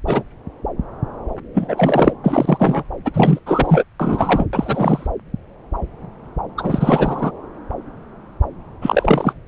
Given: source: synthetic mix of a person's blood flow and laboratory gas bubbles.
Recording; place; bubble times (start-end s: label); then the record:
Doppler ultrasound of blood flow; subclavian vein
0.06-0.23 s: bubbles
1.54-2.12 s: bubbles
2.24-2.83 s: bubbles
3.04-3.11 s: bubbles
3.14-3.39 s: bubbles
3.46-3.83 s: bubbles
4.00-4.47 s: bubbles
4.53-5.07 s: bubbles
6.58-7.31 s: bubbles
8.81-9.33 s: bubbles
From the record:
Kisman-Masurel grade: 333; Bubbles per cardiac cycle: rolling drumbeat, 9 or more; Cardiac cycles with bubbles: 50 to 99%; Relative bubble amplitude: loud (0.450 to 0.775); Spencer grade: 3 (all of the cardiac periods contain showers or single bubble signals, but not dominating or overriding the cardiac motion signals); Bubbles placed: anywhere in the cardiac cycle